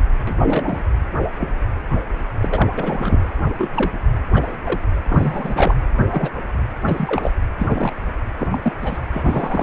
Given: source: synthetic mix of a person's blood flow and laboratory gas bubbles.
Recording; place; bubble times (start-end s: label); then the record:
Doppler ultrasound of blood flow; precordium
0.27-0.83 s: bubbles
1.39-1.52 s: bubbles
1.92-2.02 s: bubbles
2.40-2.70 s: bubbles
2.77-3.23 s: bubbles
3.58-3.90 s: bubbles
4.34-4.56 s: bubbles
4.65-4.79 s: bubbles
5.06-5.75 s: bubbles
5.94-6.04 s: bubbles
6.09-6.29 s: bubbles
6.85-7.30 s: bubbles
7.58-8.02 s: bubbles
8.38-8.47 s: bubbles
8.52-8.72 s: bubbles
8.81-8.98 s: bubbles
9.13-9.62 s: bubbles
From the record:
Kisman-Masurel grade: 242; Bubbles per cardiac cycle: several, 3 to 8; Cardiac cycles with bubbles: 100%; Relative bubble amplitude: moderate (0.250 to 0.450); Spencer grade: 3 (all of the cardiac periods contain showers or single bubble signals, but not dominating or overriding the cardiac motion signals); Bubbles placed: anywhere in the cardiac cycle